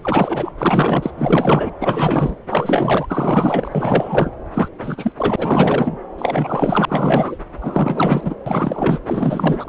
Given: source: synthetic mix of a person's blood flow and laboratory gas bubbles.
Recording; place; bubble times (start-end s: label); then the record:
Doppler ultrasound of blood flow; subclavian vein
0.02-0.51 s: bubbles
0.58-1.10 s: bubbles
1.18-1.71 s: bubbles
1.80-2.35 s: bubbles
2.47-4.31 s: bubbles
4.54-4.68 s: bubbles
4.82-5.12 s: bubbles
5.17-5.96 s: bubbles
6.18-7.38 s: bubbles
7.61-8.35 s: bubbles
8.46-8.99 s: bubbles
9.06-9.68 s: bubbles
From the record:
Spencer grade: 4 (maximum detectable bubble signal sounding continuously throughout systole and diastole of every cardiac period, and overriding the amplitude of the normal cardiac signals); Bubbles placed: anywhere in the cardiac cycle